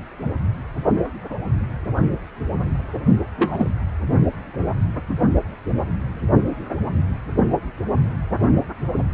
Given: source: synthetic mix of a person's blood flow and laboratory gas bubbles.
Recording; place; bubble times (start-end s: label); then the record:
Doppler ultrasound of blood flow; precordium
3.38-3.69 s: bubbles
From the record:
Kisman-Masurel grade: 112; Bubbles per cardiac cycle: 1 to 2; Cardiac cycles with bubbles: 1 to 10%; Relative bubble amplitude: moderate (0.250 to 0.450); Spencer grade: 1 (occasional bubble signal discernible with the cardiac motion signal, with majority of cardiac periods free of bubbles); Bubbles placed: only in the low amplitude regions of the cardiac cycle